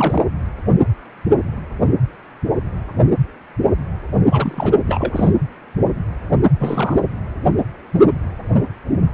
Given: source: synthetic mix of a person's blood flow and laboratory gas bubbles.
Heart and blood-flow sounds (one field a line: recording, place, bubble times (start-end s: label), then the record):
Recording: Doppler ultrasound of blood flow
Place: precordium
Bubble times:
0.00-0.25 s: bubbles
4.30-4.75 s: bubbles
4.87-5.32 s: bubbles
6.58-6.98 s: bubbles
From the record:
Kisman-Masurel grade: 222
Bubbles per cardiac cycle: several, 3 to 8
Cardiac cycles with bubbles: 10 to 50%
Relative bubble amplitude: moderate (0.250 to 0.450)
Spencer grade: 2 (many but less than half of the cardiac periods contain bubble signals, singularly or in groups)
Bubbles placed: anywhere in the cardiac cycle